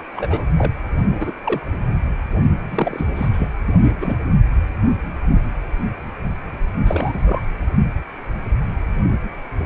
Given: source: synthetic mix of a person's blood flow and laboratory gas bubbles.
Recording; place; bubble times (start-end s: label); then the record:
Doppler ultrasound of blood flow; precordium
0.16-0.46 s: bubbles
0.58-0.71 s: bubbles
1.07-1.32 s: bubbles
1.44-1.61 s: bubbles
2.71-3.06 s: bubbles
3.16-3.29 s: bubbles
3.32-3.48 s: bubbles
3.79-4.18 s: bubbles
6.85-7.40 s: bubbles
From the record:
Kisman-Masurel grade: 232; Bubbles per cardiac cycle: several, 3 to 8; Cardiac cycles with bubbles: 50 to 99%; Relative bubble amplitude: moderate (0.250 to 0.450); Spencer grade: 3 (all of the cardiac periods contain showers or single bubble signals, but not dominating or overriding the cardiac motion signals); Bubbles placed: anywhere in the cardiac cycle